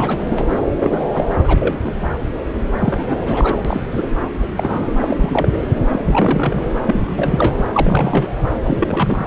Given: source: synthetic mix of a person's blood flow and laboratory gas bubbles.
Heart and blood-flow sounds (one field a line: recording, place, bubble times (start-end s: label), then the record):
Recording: Doppler ultrasound of blood flow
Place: subclavian vein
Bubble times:
0.00-0.23 s: bubbles
0.28-0.44 s: bubbles
0.50-0.59 s: bubbles
0.83-1.03 s: bubbles
1.14-1.26 s: bubbles
1.44-1.94 s: bubbles
2.84-3.62 s: bubbles
3.65-3.82 s: bubbles
3.94-4.07 s: bubbles
4.35-4.47 s: bubbles
4.57-4.94 s: bubbles
5.00-5.62 s: bubbles
5.90-6.73 s: bubbles
6.85-7.67 s: bubbles
7.72-8.30 s: bubbles
8.64-9.27 s: bubbles
From the record:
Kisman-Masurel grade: 242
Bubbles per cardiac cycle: several, 3 to 8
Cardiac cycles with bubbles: 100%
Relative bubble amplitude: moderate (0.250 to 0.450)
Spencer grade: 3 (all of the cardiac periods contain showers or single bubble signals, but not dominating or overriding the cardiac motion signals)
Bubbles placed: anywhere in the cardiac cycle